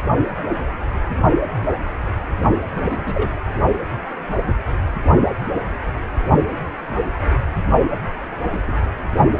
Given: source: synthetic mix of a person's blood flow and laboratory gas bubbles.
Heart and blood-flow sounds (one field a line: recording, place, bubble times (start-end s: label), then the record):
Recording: Doppler ultrasound of blood flow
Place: precordium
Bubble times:
2.75-3.33 s: bubbles
8.52-8.59 s: bubbles
8.67-8.73 s: bubbles
From the record:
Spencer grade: 2 (many but less than half of the cardiac periods contain bubble signals, singularly or in groups)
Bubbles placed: only in the low amplitude regions of the cardiac cycle